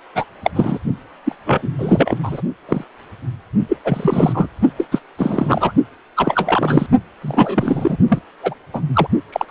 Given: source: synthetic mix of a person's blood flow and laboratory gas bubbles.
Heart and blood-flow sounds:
Doppler ultrasound of blood flow; precordium
0.15-0.25 s: bubbles
0.44-0.50 s: bubbles
0.55-0.79 s: bubbles
1.24-1.35 s: bubbles
1.45-1.68 s: bubbles
1.78-2.17 s: bubbles
2.23-2.41 s: bubbles
2.69-2.84 s: bubbles
3.69-3.77 s: bubbles
3.85-4.48 s: bubbles
4.77-4.85 s: bubbles
4.91-4.99 s: bubbles
5.18-5.72 s: bubbles
6.16-6.87 s: bubbles
7.22-7.97 s: bubbles
8.08-8.19 s: bubbles
8.43-8.54 s: bubbles
8.73-8.80 s: bubbles
8.93-9.07 s: bubbles
9.32-9.51 s: bubbles
From the record:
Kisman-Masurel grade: 333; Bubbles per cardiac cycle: rolling drumbeat, 9 or more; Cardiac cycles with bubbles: 50 to 99%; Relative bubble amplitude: loud (0.450 to 0.775); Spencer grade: 3 (all of the cardiac periods contain showers or single bubble signals, but not dominating or overriding the cardiac motion signals); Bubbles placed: only in the low amplitude regions of the cardiac cycle

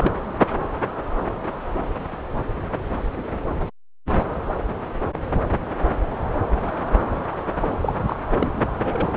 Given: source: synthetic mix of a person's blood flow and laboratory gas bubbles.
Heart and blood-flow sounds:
Doppler ultrasound of blood flow; subclavian vein
0.00-0.14 s: bubbles
7.80-7.93 s: bubbles
8.06-8.16 s: bubbles
8.40-8.49 s: bubbles
8.84-9.09 s: bubbles
From the record:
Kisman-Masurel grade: 221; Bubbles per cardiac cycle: several, 3 to 8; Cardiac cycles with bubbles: 10 to 50%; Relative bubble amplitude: barely perceptible (0.100 to 0.250); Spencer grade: 2 (many but less than half of the cardiac periods contain bubble signals, singularly or in groups); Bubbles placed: anywhere in the cardiac cycle

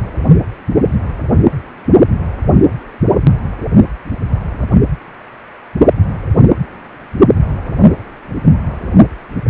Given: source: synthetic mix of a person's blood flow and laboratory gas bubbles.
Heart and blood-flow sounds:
Doppler ultrasound of blood flow; precordium
0.67-0.91 s: bubbles
7.33-7.43 s: bubbles
From the record:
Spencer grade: 2 (many but less than half of the cardiac periods contain bubble signals, singularly or in groups); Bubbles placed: anywhere in the cardiac cycle

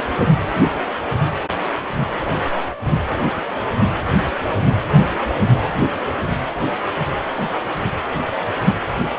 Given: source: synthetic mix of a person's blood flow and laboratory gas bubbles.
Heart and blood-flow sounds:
Doppler ultrasound of blood flow; precordium
no bubbles
From the record:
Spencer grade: 0 (complete lack of bubble signals)

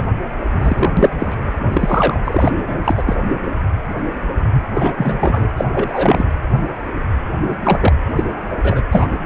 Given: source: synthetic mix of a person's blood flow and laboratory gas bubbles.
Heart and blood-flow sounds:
Doppler ultrasound of blood flow; precordium
0.00-0.08 s: bubbles
0.59-0.93 s: bubbles
0.97-1.36 s: bubbles
1.72-2.19 s: bubbles
2.24-2.52 s: bubbles
2.67-3.03 s: bubbles
3.06-3.15 s: bubbles
4.74-4.93 s: bubbles
4.97-5.48 s: bubbles
5.57-5.65 s: bubbles
5.71-6.25 s: bubbles
7.50-7.56 s: bubbles
7.63-7.93 s: bubbles
8.15-8.24 s: bubbles
8.62-8.81 s: bubbles
8.91-9.17 s: bubbles
From the record:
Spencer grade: 3 (all of the cardiac periods contain showers or single bubble signals, but not dominating or overriding the cardiac motion signals); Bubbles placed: anywhere in the cardiac cycle

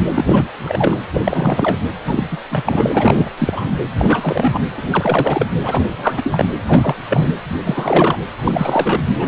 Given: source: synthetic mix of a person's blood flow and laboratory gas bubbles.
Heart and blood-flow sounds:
Doppler ultrasound of blood flow; precordium
0.14-0.48 s: bubbles
0.64-0.97 s: bubbles
1.13-1.79 s: bubbles
2.05-2.27 s: bubbles
2.31-2.38 s: bubbles
2.50-3.31 s: bubbles
3.38-3.71 s: bubbles
3.98-4.60 s: bubbles
4.72-5.46 s: bubbles
5.62-5.84 s: bubbles
5.97-6.45 s: bubbles
6.67-6.95 s: bubbles
7.10-7.30 s: bubbles
7.50-7.56 s: bubbles
7.64-8.19 s: bubbles
8.42-9.03 s: bubbles
9.18-9.28 s: bubbles
From the record:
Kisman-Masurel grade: 343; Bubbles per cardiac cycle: rolling drumbeat, 9 or more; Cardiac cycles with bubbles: 100%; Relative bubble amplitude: loud (0.450 to 0.775); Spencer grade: 3 (all of the cardiac periods contain showers or single bubble signals, but not dominating or overriding the cardiac motion signals); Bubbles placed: anywhere in the cardiac cycle

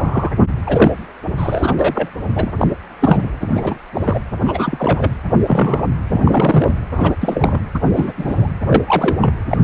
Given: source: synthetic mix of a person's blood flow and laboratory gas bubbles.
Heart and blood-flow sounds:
Doppler ultrasound of blood flow; precordium
0.00-0.30 s: bubbles
0.67-0.91 s: bubbles
1.37-1.73 s: bubbles
1.79-2.09 s: bubbles
2.34-2.53 s: bubbles
2.57-2.67 s: bubbles
2.99-3.29 s: bubbles
3.40-3.78 s: bubbles
3.94-4.20 s: bubbles
4.44-5.11 s: bubbles
5.42-5.87 s: bubbles
6.10-6.75 s: bubbles
6.94-7.12 s: bubbles
7.21-7.58 s: bubbles
7.75-7.79 s: bubbles
7.95-8.12 s: bubbles
8.17-8.47 s: bubbles
8.66-8.82 s: bubbles
8.87-9.16 s: bubbles
9.21-9.35 s: bubbles
9.48-9.57 s: bubbles
9.61-9.64 s: bubbles
From the record:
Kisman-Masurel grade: 243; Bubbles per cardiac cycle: several, 3 to 8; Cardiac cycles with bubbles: 100%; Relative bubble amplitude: loud (0.450 to 0.775); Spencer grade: 3 (all of the cardiac periods contain showers or single bubble signals, but not dominating or overriding the cardiac motion signals); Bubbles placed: anywhere in the cardiac cycle

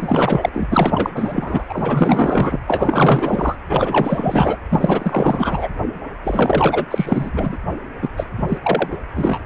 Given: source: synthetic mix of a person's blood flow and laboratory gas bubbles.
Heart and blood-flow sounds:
Doppler ultrasound of blood flow; precordium
0.00-0.49 s: bubbles
0.53-0.67 s: bubbles
0.71-1.10 s: bubbles
1.15-1.64 s: bubbles
1.69-2.59 s: bubbles
2.67-3.55 s: bubbles
3.69-4.57 s: bubbles
4.71-5.69 s: bubbles
6.23-6.86 s: bubbles
6.91-7.58 s: bubbles
8.02-8.09 s: bubbles
8.17-8.26 s: bubbles
8.37-8.58 s: bubbles
8.62-8.88 s: bubbles
8.91-8.97 s: bubbles
9.15-9.39 s: bubbles
From the record:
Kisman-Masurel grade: 444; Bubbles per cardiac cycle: continuous sound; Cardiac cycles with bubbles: 100%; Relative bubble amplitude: maximal (0.775 to 0.999); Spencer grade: 4 (maximum detectable bubble signal sounding continuously throughout systole and diastole of every cardiac period, and overriding the amplitude of the normal cardiac signals); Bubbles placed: anywhere in the cardiac cycle

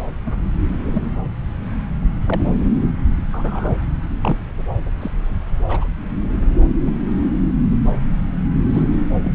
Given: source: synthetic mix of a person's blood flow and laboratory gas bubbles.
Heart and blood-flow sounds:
Doppler ultrasound of blood flow; subclavian vein
0.26-0.30 s: bubbles
0.64-1.11 s: bubbles
2.27-2.46 s: bubbles
3.31-3.73 s: bubbles
4.21-4.36 s: bubbles
5.00-5.11 s: bubbles
5.65-5.86 s: bubbles
6.81-6.91 s: bubbles
8.73-8.84 s: bubbles
9.24-9.32 s: bubbles
From the record:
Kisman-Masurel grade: 122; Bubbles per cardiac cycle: 1 to 2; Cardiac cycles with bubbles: 10 to 50%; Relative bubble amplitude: moderate (0.250 to 0.450); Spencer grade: 2 (many but less than half of the cardiac periods contain bubble signals, singularly or in groups); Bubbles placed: anywhere in the cardiac cycle

